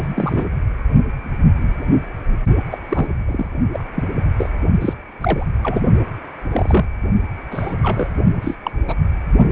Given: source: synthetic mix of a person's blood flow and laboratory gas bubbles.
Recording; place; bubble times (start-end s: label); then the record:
Doppler ultrasound of blood flow; precordium
0.00-0.07 s: bubbles
0.10-0.46 s: bubbles
2.71-2.78 s: bubbles
2.89-3.08 s: bubbles
3.25-3.49 s: bubbles
3.73-3.83 s: bubbles
3.96-4.09 s: bubbles
4.38-4.50 s: bubbles
4.80-4.93 s: bubbles
5.21-5.46 s: bubbles
5.62-5.81 s: bubbles
6.50-6.86 s: bubbles
7.50-7.74 s: bubbles
7.83-8.07 s: bubbles
8.41-8.57 s: bubbles
8.64-8.71 s: bubbles
8.88-8.95 s: bubbles
From the record:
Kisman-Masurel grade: 232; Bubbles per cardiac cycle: several, 3 to 8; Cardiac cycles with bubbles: 50 to 99%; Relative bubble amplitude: moderate (0.250 to 0.450); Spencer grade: 3 (all of the cardiac periods contain showers or single bubble signals, but not dominating or overriding the cardiac motion signals); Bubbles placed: only in the low amplitude regions of the cardiac cycle